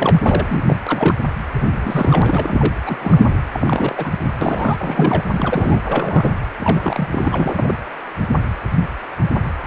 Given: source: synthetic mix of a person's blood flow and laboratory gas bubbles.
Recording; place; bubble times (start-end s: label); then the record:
Doppler ultrasound of blood flow; precordium
0.00-0.19 s: bubbles
0.21-0.77 s: bubbles
0.86-1.16 s: bubbles
1.52-2.74 s: bubbles
2.86-3.25 s: bubbles
3.53-4.25 s: bubbles
4.41-5.23 s: bubbles
5.32-5.79 s: bubbles
5.82-6.30 s: bubbles
6.60-7.08 s: bubbles
7.12-7.75 s: bubbles
9.63-9.67 s: bubbles
From the record:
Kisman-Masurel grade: 332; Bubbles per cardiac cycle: rolling drumbeat, 9 or more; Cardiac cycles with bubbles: 50 to 99%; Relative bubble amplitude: moderate (0.250 to 0.450); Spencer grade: 3 (all of the cardiac periods contain showers or single bubble signals, but not dominating or overriding the cardiac motion signals); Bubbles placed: anywhere in the cardiac cycle